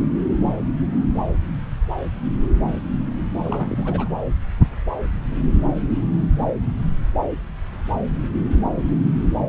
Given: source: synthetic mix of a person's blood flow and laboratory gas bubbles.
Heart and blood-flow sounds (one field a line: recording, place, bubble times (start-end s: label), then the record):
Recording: Doppler ultrasound of blood flow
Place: subclavian vein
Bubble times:
3.44-4.08 s: bubbles
From the record:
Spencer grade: 1 (occasional bubble signal discernible with the cardiac motion signal, with majority of cardiac periods free of bubbles)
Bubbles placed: anywhere in the cardiac cycle